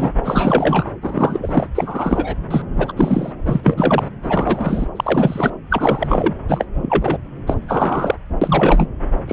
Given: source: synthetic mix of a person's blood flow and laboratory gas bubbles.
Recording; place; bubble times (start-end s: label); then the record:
Doppler ultrasound of blood flow; subclavian vein
0.00-0.10 s: bubbles
0.24-0.91 s: bubbles
1.02-1.67 s: bubbles
1.75-2.35 s: bubbles
2.50-2.62 s: bubbles
2.77-2.92 s: bubbles
2.97-3.33 s: bubbles
3.46-4.08 s: bubbles
4.22-4.86 s: bubbles
4.95-5.51 s: bubbles
5.70-6.34 s: bubbles
6.48-6.65 s: bubbles
6.74-7.17 s: bubbles
7.46-7.55 s: bubbles
7.68-8.15 s: bubbles
8.41-8.88 s: bubbles
9.27-9.33 s: bubbles
From the record:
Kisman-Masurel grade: 333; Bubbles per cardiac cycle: rolling drumbeat, 9 or more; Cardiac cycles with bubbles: 50 to 99%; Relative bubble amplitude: loud (0.450 to 0.775); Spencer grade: 3 (all of the cardiac periods contain showers or single bubble signals, but not dominating or overriding the cardiac motion signals); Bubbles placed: anywhere in the cardiac cycle